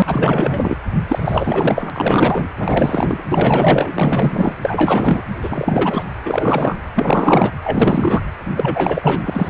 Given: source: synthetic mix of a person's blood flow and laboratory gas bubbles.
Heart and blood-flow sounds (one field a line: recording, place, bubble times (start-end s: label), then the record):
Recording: Doppler ultrasound of blood flow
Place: precordium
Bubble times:
0.00-0.03 s: bubbles
0.05-0.77 s: bubbles
1.08-1.90 s: bubbles
1.92-2.46 s: bubbles
2.59-3.23 s: bubbles
3.29-4.57 s: bubbles
4.61-5.22 s: bubbles
5.41-6.04 s: bubbles
6.25-6.78 s: bubbles
6.95-7.53 s: bubbles
7.63-8.22 s: bubbles
8.55-9.22 s: bubbles
9.25-9.50 s: bubbles
From the record:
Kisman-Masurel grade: 444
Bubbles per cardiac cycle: continuous sound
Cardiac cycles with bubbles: 100%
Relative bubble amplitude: maximal (0.775 to 0.999)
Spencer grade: 4 (maximum detectable bubble signal sounding continuously throughout systole and diastole of every cardiac period, and overriding the amplitude of the normal cardiac signals)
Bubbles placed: anywhere in the cardiac cycle